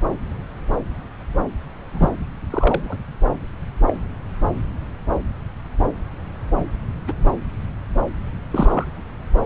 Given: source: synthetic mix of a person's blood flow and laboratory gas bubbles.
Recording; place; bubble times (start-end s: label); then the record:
Doppler ultrasound of blood flow; subclavian vein
1.93-2.09 s: bubbles
2.50-2.99 s: bubbles
3.88-3.94 s: bubbles
7.07-7.13 s: bubbles
8.51-8.85 s: bubbles
From the record:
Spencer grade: 2 (many but less than half of the cardiac periods contain bubble signals, singularly or in groups); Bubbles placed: anywhere in the cardiac cycle